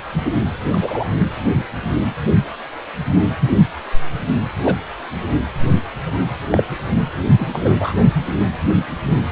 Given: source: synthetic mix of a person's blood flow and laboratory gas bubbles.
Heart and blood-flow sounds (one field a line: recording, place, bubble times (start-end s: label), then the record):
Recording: Doppler ultrasound of blood flow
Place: precordium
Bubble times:
0.71-1.06 s: bubbles
4.65-4.76 s: bubbles
6.51-6.63 s: bubbles
7.38-7.46 s: bubbles
7.53-7.93 s: bubbles
From the record:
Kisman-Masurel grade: 123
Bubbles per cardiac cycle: 1 to 2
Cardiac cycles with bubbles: 10 to 50%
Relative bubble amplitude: loud (0.450 to 0.775)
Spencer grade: 2 (many but less than half of the cardiac periods contain bubble signals, singularly or in groups)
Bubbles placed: anywhere in the cardiac cycle